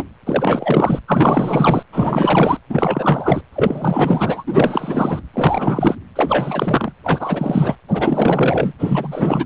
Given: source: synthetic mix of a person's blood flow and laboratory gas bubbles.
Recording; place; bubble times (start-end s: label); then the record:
Doppler ultrasound of blood flow; precordium
0.00-0.03 s: bubbles
0.26-0.99 s: bubbles
1.08-1.83 s: bubbles
1.92-2.58 s: bubbles
2.69-3.41 s: bubbles
3.52-4.44 s: bubbles
4.46-5.21 s: bubbles
5.33-5.95 s: bubbles
6.16-6.92 s: bubbles
7.04-7.75 s: bubbles
7.88-8.73 s: bubbles
8.79-9.46 s: bubbles
From the record:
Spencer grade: 4 (maximum detectable bubble signal sounding continuously throughout systole and diastole of every cardiac period, and overriding the amplitude of the normal cardiac signals); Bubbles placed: anywhere in the cardiac cycle